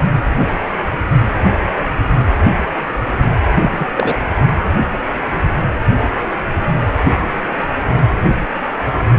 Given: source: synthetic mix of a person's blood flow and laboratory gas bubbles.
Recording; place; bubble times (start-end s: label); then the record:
Doppler ultrasound of blood flow; precordium
3.54-3.70 s: bubbles
3.78-3.87 s: bubbles
3.96-4.21 s: bubbles
From the record:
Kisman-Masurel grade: 212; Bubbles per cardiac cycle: several, 3 to 8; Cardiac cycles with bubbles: 1 to 10%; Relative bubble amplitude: moderate (0.250 to 0.450); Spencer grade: 1 (occasional bubble signal discernible with the cardiac motion signal, with majority of cardiac periods free of bubbles); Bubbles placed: anywhere in the cardiac cycle